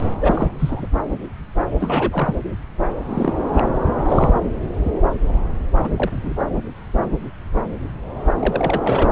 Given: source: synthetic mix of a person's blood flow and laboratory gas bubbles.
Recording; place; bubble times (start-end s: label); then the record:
Doppler ultrasound of blood flow; subclavian vein
0.20-0.52 s: bubbles
0.58-0.88 s: bubbles
1.80-2.35 s: bubbles
3.09-3.33 s: bubbles
3.38-3.69 s: bubbles
4.05-4.40 s: bubbles
5.83-5.89 s: bubbles
5.96-6.33 s: bubbles
8.40-9.10 s: bubbles
From the record:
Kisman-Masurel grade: 222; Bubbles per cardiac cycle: several, 3 to 8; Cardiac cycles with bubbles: 10 to 50%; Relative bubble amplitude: moderate (0.250 to 0.450); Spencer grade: 2 (many but less than half of the cardiac periods contain bubble signals, singularly or in groups); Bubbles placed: anywhere in the cardiac cycle